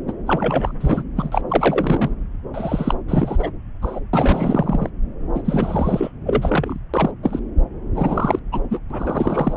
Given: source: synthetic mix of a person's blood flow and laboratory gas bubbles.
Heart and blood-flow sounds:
Doppler ultrasound of blood flow; subclavian vein
0.08-0.12 s: bubbles
0.27-0.73 s: bubbles
0.80-1.03 s: bubbles
1.16-1.42 s: bubbles
1.49-2.10 s: bubbles
2.54-2.96 s: bubbles
3.08-3.52 s: bubbles
3.82-4.00 s: bubbles
4.13-4.89 s: bubbles
5.34-5.42 s: bubbles
5.45-6.11 s: bubbles
6.25-6.79 s: bubbles
6.94-7.11 s: bubbles
7.23-7.40 s: bubbles
7.94-8.39 s: bubbles
8.52-8.60 s: bubbles
8.71-8.79 s: bubbles
8.90-9.57 s: bubbles
From the record:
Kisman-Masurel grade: 332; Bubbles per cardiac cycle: rolling drumbeat, 9 or more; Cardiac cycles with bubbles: 50 to 99%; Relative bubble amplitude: moderate (0.250 to 0.450); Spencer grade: 3 (all of the cardiac periods contain showers or single bubble signals, but not dominating or overriding the cardiac motion signals); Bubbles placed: anywhere in the cardiac cycle

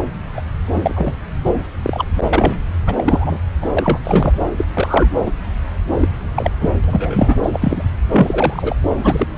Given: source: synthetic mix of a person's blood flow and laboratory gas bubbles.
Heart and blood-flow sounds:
Doppler ultrasound of blood flow; subclavian vein
0.00-0.06 s: bubbles
0.36-0.41 s: bubbles
0.72-1.18 s: bubbles
1.46-1.52 s: bubbles
1.82-2.05 s: bubbles
2.15-2.58 s: bubbles
2.86-3.40 s: bubbles
3.61-3.68 s: bubbles
3.76-3.99 s: bubbles
4.03-4.33 s: bubbles
4.57-4.66 s: bubbles
4.74-5.10 s: bubbles
5.25-5.31 s: bubbles
5.99-6.08 s: bubbles
6.34-6.50 s: bubbles
6.60-6.71 s: bubbles
6.84-7.36 s: bubbles
7.42-7.50 s: bubbles
7.53-7.84 s: bubbles
8.14-8.74 s: bubbles
9.02-9.38 s: bubbles
From the record:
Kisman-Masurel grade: 243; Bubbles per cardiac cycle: several, 3 to 8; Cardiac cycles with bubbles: 100%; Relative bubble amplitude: loud (0.450 to 0.775); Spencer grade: 3 (all of the cardiac periods contain showers or single bubble signals, but not dominating or overriding the cardiac motion signals); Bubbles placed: anywhere in the cardiac cycle

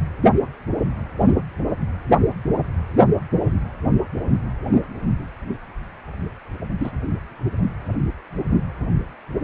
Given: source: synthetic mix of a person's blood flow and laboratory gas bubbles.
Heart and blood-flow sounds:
Doppler ultrasound of blood flow; precordium
6.79-6.92 s: bubbles
From the record:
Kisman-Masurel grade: 112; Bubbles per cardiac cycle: 1 to 2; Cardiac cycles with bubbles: 1 to 10%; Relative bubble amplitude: moderate (0.250 to 0.450); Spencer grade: 1 (occasional bubble signal discernible with the cardiac motion signal, with majority of cardiac periods free of bubbles); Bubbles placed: only in the low amplitude regions of the cardiac cycle

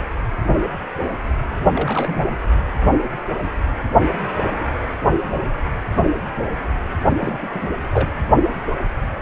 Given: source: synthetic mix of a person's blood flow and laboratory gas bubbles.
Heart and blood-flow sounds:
Doppler ultrasound of blood flow; precordium
1.75-2.36 s: bubbles
7.19-7.49 s: bubbles
7.54-7.69 s: bubbles
7.92-8.11 s: bubbles
From the record:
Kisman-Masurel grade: 221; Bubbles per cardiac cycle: several, 3 to 8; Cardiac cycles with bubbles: 10 to 50%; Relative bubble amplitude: barely perceptible (0.100 to 0.250); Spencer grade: 2 (many but less than half of the cardiac periods contain bubble signals, singularly or in groups); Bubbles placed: only in the low amplitude regions of the cardiac cycle

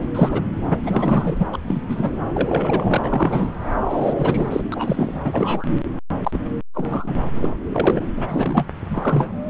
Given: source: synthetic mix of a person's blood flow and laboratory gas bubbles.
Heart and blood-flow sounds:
Doppler ultrasound of blood flow; subclavian vein
0.15-0.43 s: bubbles
0.70-0.77 s: bubbles
0.83-1.45 s: bubbles
1.52-1.58 s: bubbles
1.67-1.81 s: bubbles
1.88-2.17 s: bubbles
2.33-2.99 s: bubbles
3.02-3.51 s: bubbles
3.89-4.63 s: bubbles
4.72-5.20 s: bubbles
5.25-5.66 s: bubbles
6.23-6.39 s: bubbles
6.74-7.14 s: bubbles
7.35-7.53 s: bubbles
7.73-8.03 s: bubbles
8.17-8.67 s: bubbles
8.90-9.36 s: bubbles
From the record:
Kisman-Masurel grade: 243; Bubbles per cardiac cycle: several, 3 to 8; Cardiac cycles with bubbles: 100%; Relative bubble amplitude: loud (0.450 to 0.775); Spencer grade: 3 (all of the cardiac periods contain showers or single bubble signals, but not dominating or overriding the cardiac motion signals); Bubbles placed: anywhere in the cardiac cycle

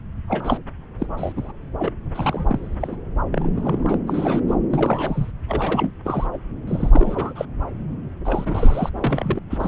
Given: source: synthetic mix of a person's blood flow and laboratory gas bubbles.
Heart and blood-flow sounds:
Doppler ultrasound of blood flow; subclavian vein
0.27-0.57 s: bubbles
0.99-1.06 s: bubbles
1.17-1.32 s: bubbles
1.36-1.52 s: bubbles
1.78-1.91 s: bubbles
2.14-2.75 s: bubbles
2.80-2.96 s: bubbles
3.32-3.50 s: bubbles
3.55-3.98 s: bubbles
4.07-4.40 s: bubbles
4.48-4.54 s: bubbles
4.71-5.31 s: bubbles
5.48-5.91 s: bubbles
6.04-6.27 s: bubbles
6.33-6.38 s: bubbles
6.67-7.45 s: bubbles
8.25-8.89 s: bubbles
8.96-9.39 s: bubbles
9.49-9.68 s: bubbles
From the record:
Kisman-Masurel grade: 342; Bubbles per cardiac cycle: rolling drumbeat, 9 or more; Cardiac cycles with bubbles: 100%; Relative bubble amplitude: moderate (0.250 to 0.450); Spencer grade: 3 (all of the cardiac periods contain showers or single bubble signals, but not dominating or overriding the cardiac motion signals); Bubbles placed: anywhere in the cardiac cycle

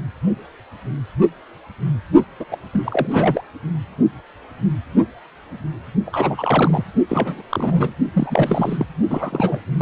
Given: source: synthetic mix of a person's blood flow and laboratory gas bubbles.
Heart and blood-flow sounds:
Doppler ultrasound of blood flow; precordium
2.40-2.45 s: bubbles
2.51-2.58 s: bubbles
2.73-3.07 s: bubbles
3.11-3.42 s: bubbles
6.05-6.84 s: bubbles
7.08-7.42 s: bubbles
7.50-7.92 s: bubbles
8.14-8.86 s: bubbles
9.09-9.61 s: bubbles
9.79-9.82 s: bubbles
From the record:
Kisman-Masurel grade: 332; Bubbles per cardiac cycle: rolling drumbeat, 9 or more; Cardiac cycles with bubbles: 50 to 99%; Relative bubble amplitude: moderate (0.250 to 0.450); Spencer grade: 3 (all of the cardiac periods contain showers or single bubble signals, but not dominating or overriding the cardiac motion signals); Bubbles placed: only in the low amplitude regions of the cardiac cycle

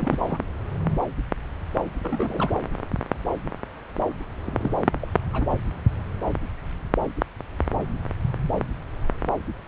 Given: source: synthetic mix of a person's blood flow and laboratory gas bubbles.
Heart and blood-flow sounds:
Doppler ultrasound of blood flow; subclavian vein
0.00-0.38 s: bubbles
2.02-2.52 s: bubbles
4.46-4.72 s: bubbles
5.01-5.09 s: bubbles
5.33-5.46 s: bubbles
From the record:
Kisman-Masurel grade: 221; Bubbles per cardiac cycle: several, 3 to 8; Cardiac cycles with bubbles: 10 to 50%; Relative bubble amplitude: barely perceptible (0.100 to 0.250); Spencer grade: 2 (many but less than half of the cardiac periods contain bubble signals, singularly or in groups); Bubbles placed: anywhere in the cardiac cycle

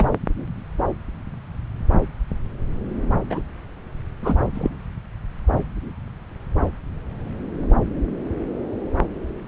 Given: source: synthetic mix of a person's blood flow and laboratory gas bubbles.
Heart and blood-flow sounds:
Doppler ultrasound of blood flow; subclavian vein
0.00-0.08 s: bubbles
3.29-3.42 s: bubbles
4.22-4.37 s: bubbles
4.54-4.70 s: bubbles
From the record:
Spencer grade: 2 (many but less than half of the cardiac periods contain bubble signals, singularly or in groups); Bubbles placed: anywhere in the cardiac cycle

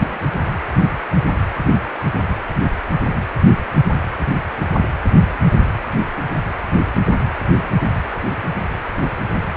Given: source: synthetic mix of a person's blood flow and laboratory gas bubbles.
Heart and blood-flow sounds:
Doppler ultrasound of blood flow; precordium
0.00-0.18 s: bubbles
From the record:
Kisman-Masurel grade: 111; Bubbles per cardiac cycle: 1 to 2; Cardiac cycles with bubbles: 1 to 10%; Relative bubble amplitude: barely perceptible (0.100 to 0.250); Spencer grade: 1 (occasional bubble signal discernible with the cardiac motion signal, with majority of cardiac periods free of bubbles); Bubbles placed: anywhere in the cardiac cycle

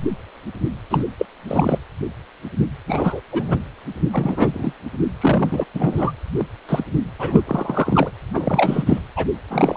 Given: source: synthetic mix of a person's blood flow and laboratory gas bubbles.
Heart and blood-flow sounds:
Doppler ultrasound of blood flow; precordium
0.89-1.05 s: bubbles
1.18-1.25 s: bubbles
1.47-1.78 s: bubbles
2.87-3.20 s: bubbles
3.32-3.62 s: bubbles
4.12-4.75 s: bubbles
5.20-5.64 s: bubbles
5.74-6.12 s: bubbles
6.38-6.46 s: bubbles
6.68-6.84 s: bubbles
7.18-7.42 s: bubbles
7.46-8.11 s: bubbles
8.34-8.84 s: bubbles
8.86-8.99 s: bubbles
9.16-9.27 s: bubbles
9.50-9.77 s: bubbles
From the record:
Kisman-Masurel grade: 233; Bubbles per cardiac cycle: several, 3 to 8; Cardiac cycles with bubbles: 50 to 99%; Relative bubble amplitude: loud (0.450 to 0.775); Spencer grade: 3 (all of the cardiac periods contain showers or single bubble signals, but not dominating or overriding the cardiac motion signals); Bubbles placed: anywhere in the cardiac cycle

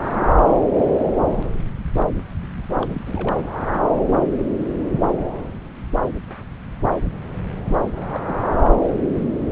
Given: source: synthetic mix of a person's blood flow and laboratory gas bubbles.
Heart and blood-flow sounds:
Doppler ultrasound of blood flow; subclavian vein
0.04-0.37 s: bubbles
2.82-3.44 s: bubbles
7.97-8.41 s: bubbles
8.58-8.67 s: bubbles
From the record:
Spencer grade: 2 (many but less than half of the cardiac periods contain bubble signals, singularly or in groups); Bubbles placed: anywhere in the cardiac cycle

